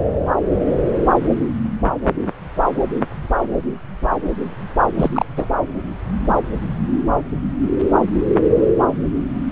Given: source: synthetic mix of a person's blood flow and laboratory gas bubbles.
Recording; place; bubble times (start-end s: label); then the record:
Doppler ultrasound of blood flow; subclavian vein
4.94-5.26 s: bubbles
5.36-5.49 s: bubbles
From the record:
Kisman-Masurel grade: 212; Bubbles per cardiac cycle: several, 3 to 8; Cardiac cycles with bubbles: 1 to 10%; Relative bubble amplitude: moderate (0.250 to 0.450); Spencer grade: 1 (occasional bubble signal discernible with the cardiac motion signal, with majority of cardiac periods free of bubbles); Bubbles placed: anywhere in the cardiac cycle